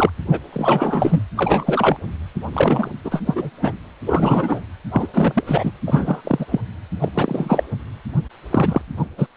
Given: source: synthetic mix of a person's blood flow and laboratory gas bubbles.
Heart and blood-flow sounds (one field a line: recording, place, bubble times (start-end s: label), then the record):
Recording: Doppler ultrasound of blood flow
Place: precordium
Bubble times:
0.00-0.10 s: bubbles
0.31-0.40 s: bubbles
0.53-1.22 s: bubbles
1.36-1.96 s: bubbles
2.53-2.90 s: bubbles
3.04-3.23 s: bubbles
3.26-3.50 s: bubbles
3.61-3.73 s: bubbles
4.06-4.64 s: bubbles
4.92-5.08 s: bubbles
5.13-5.44 s: bubbles
5.46-5.72 s: bubbles
5.87-6.21 s: bubbles
6.24-6.46 s: bubbles
6.51-6.61 s: bubbles
7.01-7.09 s: bubbles
7.14-7.64 s: bubbles
8.51-8.81 s: bubbles
8.96-9.06 s: bubbles
9.18-9.27 s: bubbles
From the record:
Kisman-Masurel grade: 343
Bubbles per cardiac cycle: rolling drumbeat, 9 or more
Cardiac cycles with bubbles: 100%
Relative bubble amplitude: loud (0.450 to 0.775)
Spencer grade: 3 (all of the cardiac periods contain showers or single bubble signals, but not dominating or overriding the cardiac motion signals)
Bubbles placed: anywhere in the cardiac cycle